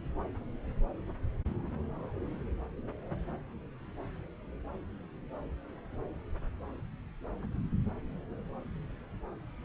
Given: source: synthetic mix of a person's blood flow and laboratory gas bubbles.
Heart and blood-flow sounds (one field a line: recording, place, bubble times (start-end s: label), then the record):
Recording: Doppler ultrasound of blood flow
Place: subclavian vein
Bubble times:
no bubbles
From the record:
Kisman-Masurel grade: 000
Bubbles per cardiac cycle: 0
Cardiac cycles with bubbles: 0%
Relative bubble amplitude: no bubbles discernible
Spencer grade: 0 (complete lack of bubble signals)